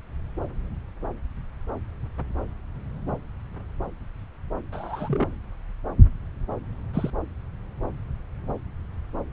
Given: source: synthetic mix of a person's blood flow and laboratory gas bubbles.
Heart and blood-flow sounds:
Doppler ultrasound of blood flow; subclavian vein
3.06-3.16 s: bubbles
4.72-5.27 s: bubbles
6.94-7.11 s: bubbles
From the record:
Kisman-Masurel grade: 121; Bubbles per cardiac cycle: 1 to 2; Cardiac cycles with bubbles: 10 to 50%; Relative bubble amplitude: barely perceptible (0.100 to 0.250); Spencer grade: 2 (many but less than half of the cardiac periods contain bubble signals, singularly or in groups); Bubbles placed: anywhere in the cardiac cycle

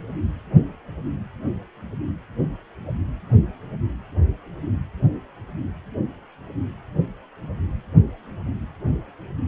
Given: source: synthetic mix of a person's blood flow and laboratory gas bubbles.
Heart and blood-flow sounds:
Doppler ultrasound of blood flow; precordium
no bubbles
From the record:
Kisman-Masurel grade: 000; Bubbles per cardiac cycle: 0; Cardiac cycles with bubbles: 0%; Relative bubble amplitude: no bubbles discernible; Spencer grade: 0 (complete lack of bubble signals)

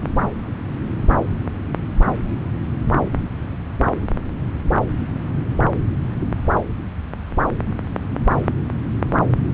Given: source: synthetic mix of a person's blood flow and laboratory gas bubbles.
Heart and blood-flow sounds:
Doppler ultrasound of blood flow; subclavian vein
no bubbles
From the record:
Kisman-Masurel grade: 000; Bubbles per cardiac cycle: 0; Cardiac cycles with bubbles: 0%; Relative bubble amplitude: no bubbles discernible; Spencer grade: 0 (complete lack of bubble signals)

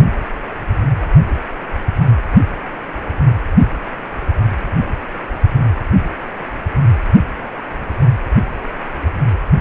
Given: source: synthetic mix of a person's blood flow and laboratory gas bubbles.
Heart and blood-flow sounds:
Doppler ultrasound of blood flow; precordium
no bubbles
From the record:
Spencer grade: 0 (complete lack of bubble signals)

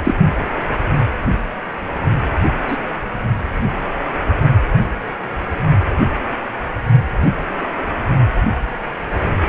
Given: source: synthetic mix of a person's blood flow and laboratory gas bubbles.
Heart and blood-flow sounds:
Doppler ultrasound of blood flow; precordium
0.04-0.15 s: bubbles
2.67-2.78 s: bubbles
From the record:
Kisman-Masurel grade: 123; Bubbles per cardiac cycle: 1 to 2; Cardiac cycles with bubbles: 10 to 50%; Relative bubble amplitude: loud (0.450 to 0.775); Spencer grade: 2 (many but less than half of the cardiac periods contain bubble signals, singularly or in groups); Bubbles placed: anywhere in the cardiac cycle

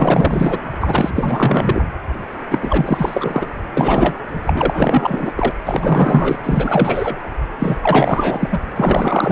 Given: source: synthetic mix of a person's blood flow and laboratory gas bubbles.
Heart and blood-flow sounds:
Doppler ultrasound of blood flow; precordium
0.00-0.59 s: bubbles
0.80-1.84 s: bubbles
2.50-2.58 s: bubbles
2.62-3.46 s: bubbles
3.77-4.15 s: bubbles
4.46-5.51 s: bubbles
5.65-6.37 s: bubbles
6.43-7.17 s: bubbles
7.59-7.79 s: bubbles
7.81-8.59 s: bubbles
8.76-9.32 s: bubbles
From the record:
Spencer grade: 4 (maximum detectable bubble signal sounding continuously throughout systole and diastole of every cardiac period, and overriding the amplitude of the normal cardiac signals); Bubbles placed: anywhere in the cardiac cycle

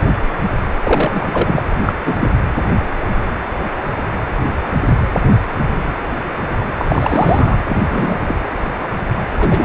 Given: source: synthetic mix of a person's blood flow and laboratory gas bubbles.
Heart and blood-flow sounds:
Doppler ultrasound of blood flow; precordium
0.83-1.62 s: bubbles
1.85-1.93 s: bubbles
2.05-2.30 s: bubbles
6.77-7.57 s: bubbles
7.67-7.77 s: bubbles
7.89-8.34 s: bubbles
9.38-9.65 s: bubbles
From the record:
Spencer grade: 2 (many but less than half of the cardiac periods contain bubble signals, singularly or in groups); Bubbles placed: anywhere in the cardiac cycle

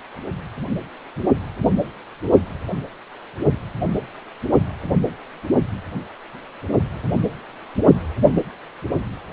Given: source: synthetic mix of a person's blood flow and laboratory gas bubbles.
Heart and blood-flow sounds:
Doppler ultrasound of blood flow; precordium
no bubbles
From the record:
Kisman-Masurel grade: 000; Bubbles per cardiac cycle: 0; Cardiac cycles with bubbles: 0%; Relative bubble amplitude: no bubbles discernible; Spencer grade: 0 (complete lack of bubble signals)

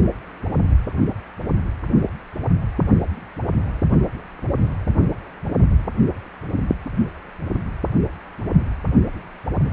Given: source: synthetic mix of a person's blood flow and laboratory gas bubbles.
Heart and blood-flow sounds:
Doppler ultrasound of blood flow; precordium
no bubbles
From the record:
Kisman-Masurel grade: 000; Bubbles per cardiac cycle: 0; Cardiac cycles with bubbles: 0%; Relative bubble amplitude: no bubbles discernible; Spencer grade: 0 (complete lack of bubble signals)

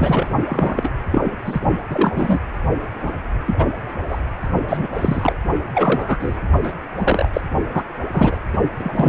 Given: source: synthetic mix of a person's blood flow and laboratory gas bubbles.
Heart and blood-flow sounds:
Doppler ultrasound of blood flow; precordium
0.00-0.28 s: bubbles
0.47-0.90 s: bubbles
1.11-1.22 s: bubbles
1.25-1.31 s: bubbles
1.45-1.60 s: bubbles
1.89-2.39 s: bubbles
2.94-3.12 s: bubbles
3.46-3.66 s: bubbles
4.08-4.17 s: bubbles
4.68-4.87 s: bubbles
4.93-5.33 s: bubbles
5.73-6.38 s: bubbles
6.63-6.74 s: bubbles
6.98-7.28 s: bubbles
7.33-7.41 s: bubbles
7.73-7.83 s: bubbles
8.13-8.40 s: bubbles
8.79-9.09 s: bubbles
From the record:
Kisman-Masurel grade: 243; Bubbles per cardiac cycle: several, 3 to 8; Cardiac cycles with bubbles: 100%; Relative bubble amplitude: loud (0.450 to 0.775); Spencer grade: 3 (all of the cardiac periods contain showers or single bubble signals, but not dominating or overriding the cardiac motion signals); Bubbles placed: only in the low amplitude regions of the cardiac cycle

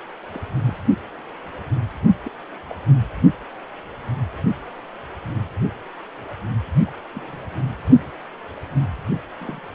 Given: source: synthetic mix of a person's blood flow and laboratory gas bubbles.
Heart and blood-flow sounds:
Doppler ultrasound of blood flow; precordium
0.32-0.40 s: bubbles
0.65-0.77 s: bubbles
2.25-2.31 s: bubbles
2.68-2.75 s: bubbles
6.86-6.93 s: bubbles
7.14-7.44 s: bubbles
9.39-9.67 s: bubbles
From the record:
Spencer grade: 2 (many but less than half of the cardiac periods contain bubble signals, singularly or in groups); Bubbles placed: anywhere in the cardiac cycle

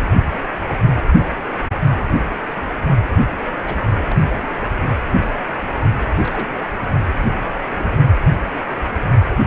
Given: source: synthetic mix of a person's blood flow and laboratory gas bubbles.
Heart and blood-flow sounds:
Doppler ultrasound of blood flow; precordium
3.65-3.79 s: bubbles
4.09-4.15 s: bubbles
4.42-4.47 s: bubbles
6.13-6.51 s: bubbles
7.75-7.96 s: bubbles
From the record:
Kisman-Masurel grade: 121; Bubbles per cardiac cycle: 1 to 2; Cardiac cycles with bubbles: 10 to 50%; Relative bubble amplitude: barely perceptible (0.100 to 0.250); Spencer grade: 2 (many but less than half of the cardiac periods contain bubble signals, singularly or in groups); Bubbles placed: anywhere in the cardiac cycle

